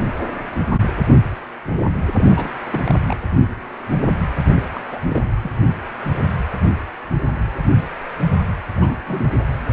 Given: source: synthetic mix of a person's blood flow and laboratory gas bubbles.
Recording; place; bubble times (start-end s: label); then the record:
Doppler ultrasound of blood flow; precordium
2.18-2.52 s: bubbles
2.73-2.99 s: bubbles
3.08-3.17 s: bubbles
4.55-4.88 s: bubbles
4.91-5.21 s: bubbles
5.42-5.50 s: bubbles
8.76-8.96 s: bubbles
9.07-9.32 s: bubbles
From the record:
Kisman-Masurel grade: 221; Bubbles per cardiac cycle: several, 3 to 8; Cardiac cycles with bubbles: 10 to 50%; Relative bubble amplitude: barely perceptible (0.100 to 0.250); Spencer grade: 2 (many but less than half of the cardiac periods contain bubble signals, singularly or in groups); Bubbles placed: anywhere in the cardiac cycle